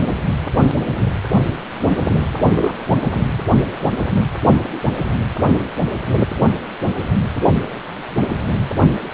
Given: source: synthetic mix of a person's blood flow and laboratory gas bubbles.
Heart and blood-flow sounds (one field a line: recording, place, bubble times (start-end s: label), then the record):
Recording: Doppler ultrasound of blood flow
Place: precordium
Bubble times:
2.35-2.78 s: bubbles
From the record:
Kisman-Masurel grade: 122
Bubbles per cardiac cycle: 1 to 2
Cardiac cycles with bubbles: 10 to 50%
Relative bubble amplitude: moderate (0.250 to 0.450)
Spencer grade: 2 (many but less than half of the cardiac periods contain bubble signals, singularly or in groups)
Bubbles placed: anywhere in the cardiac cycle